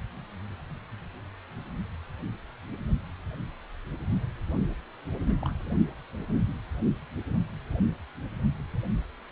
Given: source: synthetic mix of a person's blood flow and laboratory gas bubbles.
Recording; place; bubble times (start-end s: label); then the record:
Doppler ultrasound of blood flow; precordium
5.26-5.36 s: bubbles
5.41-5.53 s: bubbles
From the record:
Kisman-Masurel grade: 111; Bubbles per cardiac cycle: 1 to 2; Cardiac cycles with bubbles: 1 to 10%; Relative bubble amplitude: barely perceptible (0.100 to 0.250); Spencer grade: 1 (occasional bubble signal discernible with the cardiac motion signal, with majority of cardiac periods free of bubbles); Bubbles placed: only in the low amplitude regions of the cardiac cycle